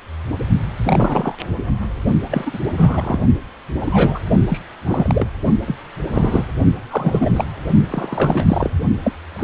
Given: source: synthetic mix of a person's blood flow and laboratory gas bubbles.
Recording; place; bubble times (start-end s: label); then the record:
Doppler ultrasound of blood flow; precordium
0.83-1.35 s: bubbles
2.30-2.59 s: bubbles
2.77-3.18 s: bubbles
3.80-4.19 s: bubbles
4.49-4.60 s: bubbles
4.86-5.27 s: bubbles
5.67-5.75 s: bubbles
6.12-6.44 s: bubbles
6.91-7.45 s: bubbles
7.88-8.71 s: bubbles
9.03-9.12 s: bubbles
9.32-9.44 s: bubbles
From the record:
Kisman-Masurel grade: 242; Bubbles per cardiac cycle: several, 3 to 8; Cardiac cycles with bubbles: 100%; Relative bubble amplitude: moderate (0.250 to 0.450); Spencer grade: 3 (all of the cardiac periods contain showers or single bubble signals, but not dominating or overriding the cardiac motion signals); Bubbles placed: only in the low amplitude regions of the cardiac cycle